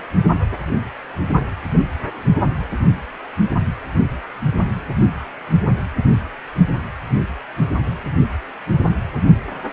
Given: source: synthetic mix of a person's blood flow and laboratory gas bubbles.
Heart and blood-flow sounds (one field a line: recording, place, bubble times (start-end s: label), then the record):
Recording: Doppler ultrasound of blood flow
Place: precordium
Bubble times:
1.72-1.78 s: bubbles
From the record:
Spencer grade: 1 (occasional bubble signal discernible with the cardiac motion signal, with majority of cardiac periods free of bubbles)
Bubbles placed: anywhere in the cardiac cycle